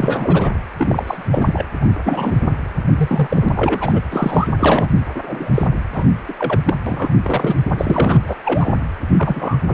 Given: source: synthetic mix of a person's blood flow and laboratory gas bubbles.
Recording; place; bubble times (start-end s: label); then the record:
Doppler ultrasound of blood flow; precordium
0.00-0.50 s: bubbles
0.77-1.43 s: bubbles
1.46-1.66 s: bubbles
1.81-1.87 s: bubbles
2.04-2.35 s: bubbles
2.96-3.49 s: bubbles
3.54-4.01 s: bubbles
4.07-4.48 s: bubbles
4.59-4.90 s: bubbles
5.14-5.50 s: bubbles
5.54-5.67 s: bubbles
5.92-6.05 s: bubbles
6.28-6.33 s: bubbles
6.38-6.62 s: bubbles
6.65-6.74 s: bubbles
6.86-7.13 s: bubbles
7.22-7.54 s: bubbles
7.78-8.21 s: bubbles
8.26-8.37 s: bubbles
8.45-8.71 s: bubbles
9.17-9.56 s: bubbles
9.68-9.74 s: bubbles
From the record:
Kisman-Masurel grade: 243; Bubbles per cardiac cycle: several, 3 to 8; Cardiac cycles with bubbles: 100%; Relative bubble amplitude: loud (0.450 to 0.775); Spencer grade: 3 (all of the cardiac periods contain showers or single bubble signals, but not dominating or overriding the cardiac motion signals); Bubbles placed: anywhere in the cardiac cycle